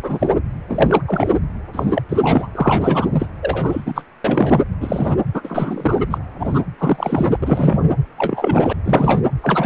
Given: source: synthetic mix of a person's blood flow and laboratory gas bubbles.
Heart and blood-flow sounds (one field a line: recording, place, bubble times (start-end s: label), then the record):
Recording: Doppler ultrasound of blood flow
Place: precordium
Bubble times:
0.03-0.32 s: bubbles
0.67-1.03 s: bubbles
1.07-1.30 s: bubbles
1.73-2.02 s: bubbles
2.09-2.17 s: bubbles
2.21-2.48 s: bubbles
2.55-3.09 s: bubbles
3.12-3.28 s: bubbles
3.42-4.04 s: bubbles
4.24-4.60 s: bubbles
4.81-5.17 s: bubbles
5.33-6.02 s: bubbles
6.10-6.18 s: bubbles
6.38-6.62 s: bubbles
6.79-7.38 s: bubbles
7.42-7.92 s: bubbles
8.17-8.73 s: bubbles
8.84-9.22 s: bubbles
9.42-9.66 s: bubbles
From the record:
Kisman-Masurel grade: 243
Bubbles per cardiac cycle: several, 3 to 8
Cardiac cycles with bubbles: 100%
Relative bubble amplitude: loud (0.450 to 0.775)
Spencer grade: 3 (all of the cardiac periods contain showers or single bubble signals, but not dominating or overriding the cardiac motion signals)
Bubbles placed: anywhere in the cardiac cycle